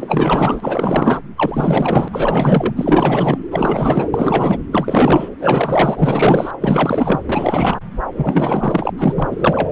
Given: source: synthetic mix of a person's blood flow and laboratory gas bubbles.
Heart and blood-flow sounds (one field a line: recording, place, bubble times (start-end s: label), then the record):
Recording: Doppler ultrasound of blood flow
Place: subclavian vein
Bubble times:
0.00-1.21 s: bubbles
1.36-2.08 s: bubbles
2.12-3.38 s: bubbles
3.50-4.08 s: bubbles
4.13-4.58 s: bubbles
4.71-5.29 s: bubbles
5.39-6.51 s: bubbles
6.62-7.20 s: bubbles
7.25-7.80 s: bubbles
8.17-8.93 s: bubbles
8.98-9.70 s: bubbles
From the record:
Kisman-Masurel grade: 444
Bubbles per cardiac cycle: continuous sound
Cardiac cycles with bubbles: 100%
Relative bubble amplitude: maximal (0.775 to 0.999)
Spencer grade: 4 (maximum detectable bubble signal sounding continuously throughout systole and diastole of every cardiac period, and overriding the amplitude of the normal cardiac signals)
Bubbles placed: anywhere in the cardiac cycle